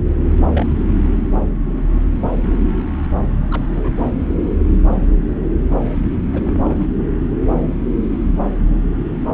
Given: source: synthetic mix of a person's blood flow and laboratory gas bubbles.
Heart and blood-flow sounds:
Doppler ultrasound of blood flow; subclavian vein
0.54-0.78 s: bubbles
0.89-0.93 s: bubbles
1.03-1.10 s: bubbles
3.51-3.90 s: bubbles
3.97-4.05 s: bubbles
6.33-6.87 s: bubbles
From the record:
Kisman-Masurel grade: 221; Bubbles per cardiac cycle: several, 3 to 8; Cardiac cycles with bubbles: 10 to 50%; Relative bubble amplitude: barely perceptible (0.100 to 0.250); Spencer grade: 2 (many but less than half of the cardiac periods contain bubble signals, singularly or in groups); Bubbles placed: anywhere in the cardiac cycle

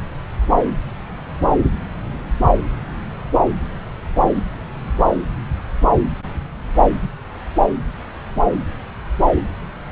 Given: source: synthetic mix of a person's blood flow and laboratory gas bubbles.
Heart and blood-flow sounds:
Doppler ultrasound of blood flow; subclavian vein
no bubbles
From the record:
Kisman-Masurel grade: 000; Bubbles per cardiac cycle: 0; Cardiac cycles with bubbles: 0%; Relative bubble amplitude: no bubbles discernible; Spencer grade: 0 (complete lack of bubble signals)

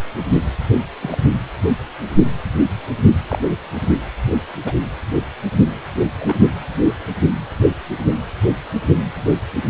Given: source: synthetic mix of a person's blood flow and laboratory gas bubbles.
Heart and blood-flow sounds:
Doppler ultrasound of blood flow; precordium
1.02-1.19 s: bubbles
3.29-3.38 s: bubbles
4.65-4.74 s: bubbles
6.18-6.36 s: bubbles
From the record:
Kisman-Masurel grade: 122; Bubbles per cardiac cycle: 1 to 2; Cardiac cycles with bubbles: 10 to 50%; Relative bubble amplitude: moderate (0.250 to 0.450); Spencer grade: 2 (many but less than half of the cardiac periods contain bubble signals, singularly or in groups); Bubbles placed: only in the low amplitude regions of the cardiac cycle

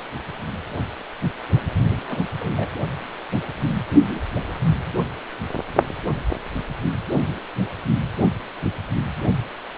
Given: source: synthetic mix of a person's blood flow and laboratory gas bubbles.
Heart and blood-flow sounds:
Doppler ultrasound of blood flow; precordium
1.78-1.89 s: bubbles
1.96-2.23 s: bubbles
2.38-2.69 s: bubbles
From the record:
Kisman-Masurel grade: 211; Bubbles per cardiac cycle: several, 3 to 8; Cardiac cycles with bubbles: 1 to 10%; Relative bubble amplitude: barely perceptible (0.100 to 0.250); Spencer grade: 1 (occasional bubble signal discernible with the cardiac motion signal, with majority of cardiac periods free of bubbles); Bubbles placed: only in the low amplitude regions of the cardiac cycle

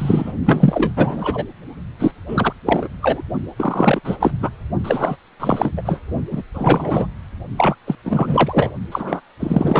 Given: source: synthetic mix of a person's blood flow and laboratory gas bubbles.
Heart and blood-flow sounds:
Doppler ultrasound of blood flow; precordium
0.00-0.33 s: bubbles
0.45-0.92 s: bubbles
0.96-1.45 s: bubbles
1.99-2.12 s: bubbles
2.28-2.53 s: bubbles
2.66-2.88 s: bubbles
3.01-3.22 s: bubbles
3.56-4.00 s: bubbles
4.04-4.17 s: bubbles
4.19-4.32 s: bubbles
4.40-4.49 s: bubbles
4.83-5.17 s: bubbles
5.39-5.72 s: bubbles
5.76-5.82 s: bubbles
5.85-6.01 s: bubbles
6.31-6.42 s: bubbles
6.54-7.07 s: bubbles
7.57-7.75 s: bubbles
7.87-7.95 s: bubbles
8.04-8.70 s: bubbles
8.92-9.21 s: bubbles
9.40-9.80 s: bubbles
From the record:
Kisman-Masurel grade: 343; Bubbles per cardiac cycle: rolling drumbeat, 9 or more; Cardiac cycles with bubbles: 100%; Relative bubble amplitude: loud (0.450 to 0.775); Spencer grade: 3 (all of the cardiac periods contain showers or single bubble signals, but not dominating or overriding the cardiac motion signals); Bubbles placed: only in the low amplitude regions of the cardiac cycle

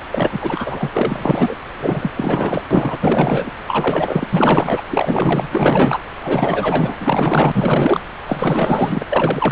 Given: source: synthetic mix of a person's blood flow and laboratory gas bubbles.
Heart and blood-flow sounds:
Doppler ultrasound of blood flow; subclavian vein
0.12-0.90 s: bubbles
0.96-1.56 s: bubbles
1.79-2.11 s: bubbles
2.16-2.65 s: bubbles
2.71-3.50 s: bubbles
3.67-4.28 s: bubbles
4.32-4.81 s: bubbles
4.90-5.48 s: bubbles
5.51-5.99 s: bubbles
6.23-6.96 s: bubbles
7.00-8.03 s: bubbles
8.26-9.52 s: bubbles
From the record:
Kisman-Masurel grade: 444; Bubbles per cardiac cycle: continuous sound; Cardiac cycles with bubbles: 100%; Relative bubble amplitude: maximal (0.775 to 0.999); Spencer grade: 4 (maximum detectable bubble signal sounding continuously throughout systole and diastole of every cardiac period, and overriding the amplitude of the normal cardiac signals); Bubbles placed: anywhere in the cardiac cycle

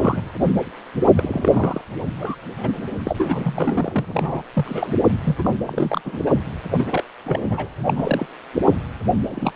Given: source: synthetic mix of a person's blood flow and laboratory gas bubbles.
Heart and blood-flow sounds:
Doppler ultrasound of blood flow; precordium
0.00-0.22 s: bubbles
1.16-1.81 s: bubbles
2.19-2.35 s: bubbles
2.63-2.69 s: bubbles
3.04-4.42 s: bubbles
4.53-4.99 s: bubbles
5.24-5.50 s: bubbles
5.66-6.01 s: bubbles
6.04-6.20 s: bubbles
6.26-6.31 s: bubbles
6.72-7.04 s: bubbles
7.24-7.68 s: bubbles
7.84-7.93 s: bubbles
7.96-8.27 s: bubbles
9.29-9.53 s: bubbles
From the record:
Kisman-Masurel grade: 242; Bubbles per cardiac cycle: several, 3 to 8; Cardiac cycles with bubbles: 100%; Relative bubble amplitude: moderate (0.250 to 0.450); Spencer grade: 3 (all of the cardiac periods contain showers or single bubble signals, but not dominating or overriding the cardiac motion signals); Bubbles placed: anywhere in the cardiac cycle

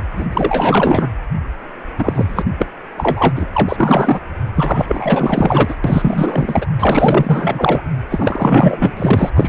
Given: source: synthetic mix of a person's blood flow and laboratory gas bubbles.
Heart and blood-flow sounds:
Doppler ultrasound of blood flow; precordium
0.16-0.26 s: bubbles
0.31-1.08 s: bubbles
1.98-2.44 s: bubbles
2.58-2.66 s: bubbles
2.97-3.31 s: bubbles
3.36-3.48 s: bubbles
3.53-4.20 s: bubbles
4.56-5.75 s: bubbles
5.84-6.66 s: bubbles
6.79-7.81 s: bubbles
8.10-9.31 s: bubbles
9.37-9.49 s: bubbles
From the record:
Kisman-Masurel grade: 444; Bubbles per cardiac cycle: continuous sound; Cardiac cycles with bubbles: 100%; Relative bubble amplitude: maximal (0.775 to 0.999); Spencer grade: 4 (maximum detectable bubble signal sounding continuously throughout systole and diastole of every cardiac period, and overriding the amplitude of the normal cardiac signals); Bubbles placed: anywhere in the cardiac cycle

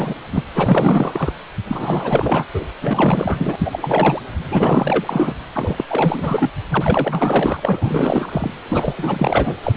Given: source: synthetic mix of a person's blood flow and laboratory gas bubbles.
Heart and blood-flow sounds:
Doppler ultrasound of blood flow; precordium
0.00-0.14 s: bubbles
0.32-0.43 s: bubbles
0.55-1.32 s: bubbles
1.67-2.45 s: bubbles
2.54-2.66 s: bubbles
2.81-4.21 s: bubbles
4.51-5.34 s: bubbles
5.54-5.84 s: bubbles
5.88-6.50 s: bubbles
6.70-8.54 s: bubbles
8.69-8.94 s: bubbles
8.96-9.55 s: bubbles
9.63-9.72 s: bubbles
9.75-9.77 s: bubbles
From the record:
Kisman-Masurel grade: 444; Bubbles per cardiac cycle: continuous sound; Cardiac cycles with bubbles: 100%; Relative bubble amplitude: maximal (0.775 to 0.999); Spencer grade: 4 (maximum detectable bubble signal sounding continuously throughout systole and diastole of every cardiac period, and overriding the amplitude of the normal cardiac signals); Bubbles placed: anywhere in the cardiac cycle

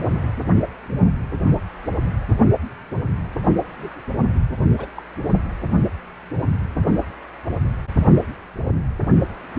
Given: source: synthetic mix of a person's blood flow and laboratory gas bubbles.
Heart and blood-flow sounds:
Doppler ultrasound of blood flow; precordium
0.45-0.52 s: bubbles
3.79-4.00 s: bubbles
4.77-4.88 s: bubbles
4.95-5.02 s: bubbles
From the record:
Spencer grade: 2 (many but less than half of the cardiac periods contain bubble signals, singularly or in groups); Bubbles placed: only in the low amplitude regions of the cardiac cycle

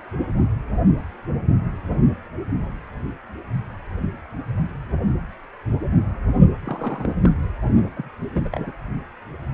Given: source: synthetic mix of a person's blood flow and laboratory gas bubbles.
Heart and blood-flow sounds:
Doppler ultrasound of blood flow; precordium
6.64-7.12 s: bubbles
7.24-7.31 s: bubbles
7.96-8.09 s: bubbles
8.33-8.49 s: bubbles
8.51-8.72 s: bubbles
From the record:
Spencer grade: 2 (many but less than half of the cardiac periods contain bubble signals, singularly or in groups); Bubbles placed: only in the low amplitude regions of the cardiac cycle

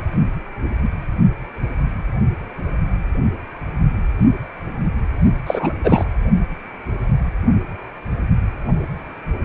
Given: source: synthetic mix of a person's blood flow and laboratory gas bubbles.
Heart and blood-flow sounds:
Doppler ultrasound of blood flow; precordium
5.46-5.74 s: bubbles
5.83-6.08 s: bubbles
From the record:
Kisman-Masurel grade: 223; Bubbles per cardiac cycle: several, 3 to 8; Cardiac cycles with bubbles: 10 to 50%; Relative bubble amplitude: loud (0.450 to 0.775); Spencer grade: 2 (many but less than half of the cardiac periods contain bubble signals, singularly or in groups); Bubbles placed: only in the low amplitude regions of the cardiac cycle

